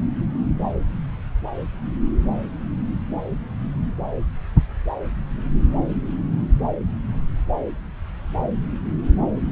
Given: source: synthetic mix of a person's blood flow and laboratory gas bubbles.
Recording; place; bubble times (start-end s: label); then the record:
Doppler ultrasound of blood flow; subclavian vein
no bubbles
From the record:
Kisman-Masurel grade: 000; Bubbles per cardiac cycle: 0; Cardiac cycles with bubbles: 0%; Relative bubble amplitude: no bubbles discernible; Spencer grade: 0 (complete lack of bubble signals)